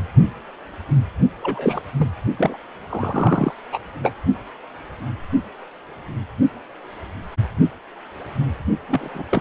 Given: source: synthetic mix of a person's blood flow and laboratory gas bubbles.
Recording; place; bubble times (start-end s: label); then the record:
Doppler ultrasound of blood flow; precordium
1.42-1.82 s: bubbles
1.98-2.08 s: bubbles
2.37-2.58 s: bubbles
2.89-3.54 s: bubbles
3.72-3.78 s: bubbles
4.03-4.13 s: bubbles
8.88-9.09 s: bubbles
9.14-9.24 s: bubbles
9.29-9.41 s: bubbles
From the record:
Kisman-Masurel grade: 232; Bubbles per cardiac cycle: several, 3 to 8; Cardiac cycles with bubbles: 50 to 99%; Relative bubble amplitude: moderate (0.250 to 0.450); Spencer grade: 3 (all of the cardiac periods contain showers or single bubble signals, but not dominating or overriding the cardiac motion signals); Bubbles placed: only in the low amplitude regions of the cardiac cycle